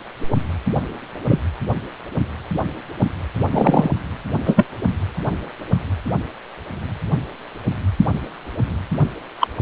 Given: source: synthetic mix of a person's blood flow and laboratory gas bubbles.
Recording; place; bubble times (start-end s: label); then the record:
Doppler ultrasound of blood flow; precordium
1.26-1.40 s: bubbles
3.51-3.90 s: bubbles
4.45-4.65 s: bubbles
9.40-9.47 s: bubbles
From the record:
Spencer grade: 2 (many but less than half of the cardiac periods contain bubble signals, singularly or in groups); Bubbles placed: anywhere in the cardiac cycle